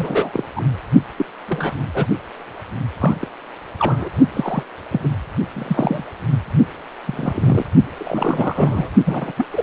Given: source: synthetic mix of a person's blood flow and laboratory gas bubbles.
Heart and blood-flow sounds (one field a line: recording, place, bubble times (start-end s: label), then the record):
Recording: Doppler ultrasound of blood flow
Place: precordium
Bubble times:
0.00-0.45 s: bubbles
0.56-0.61 s: bubbles
1.18-1.26 s: bubbles
1.48-1.74 s: bubbles
1.94-2.06 s: bubbles
2.98-3.27 s: bubbles
3.79-4.09 s: bubbles
4.33-4.63 s: bubbles
4.90-5.14 s: bubbles
5.48-6.04 s: bubbles
7.07-7.66 s: bubbles
7.97-8.89 s: bubbles
9.04-9.32 s: bubbles
9.37-9.47 s: bubbles
9.50-9.63 s: bubbles
From the record:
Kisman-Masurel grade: 242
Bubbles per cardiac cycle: several, 3 to 8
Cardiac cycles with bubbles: 100%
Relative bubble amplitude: moderate (0.250 to 0.450)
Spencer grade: 3 (all of the cardiac periods contain showers or single bubble signals, but not dominating or overriding the cardiac motion signals)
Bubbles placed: only in the low amplitude regions of the cardiac cycle